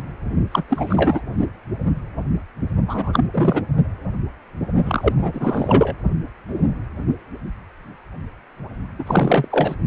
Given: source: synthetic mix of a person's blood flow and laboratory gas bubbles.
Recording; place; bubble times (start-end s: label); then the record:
Doppler ultrasound of blood flow; precordium
0.52-0.64 s: bubbles
0.67-1.21 s: bubbles
2.87-3.25 s: bubbles
3.33-3.61 s: bubbles
4.85-5.12 s: bubbles
5.16-5.95 s: bubbles
8.99-9.76 s: bubbles
From the record:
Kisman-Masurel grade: 333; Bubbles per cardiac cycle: rolling drumbeat, 9 or more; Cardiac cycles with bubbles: 50 to 99%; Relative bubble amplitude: loud (0.450 to 0.775); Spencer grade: 3 (all of the cardiac periods contain showers or single bubble signals, but not dominating or overriding the cardiac motion signals); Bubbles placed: only in the low amplitude regions of the cardiac cycle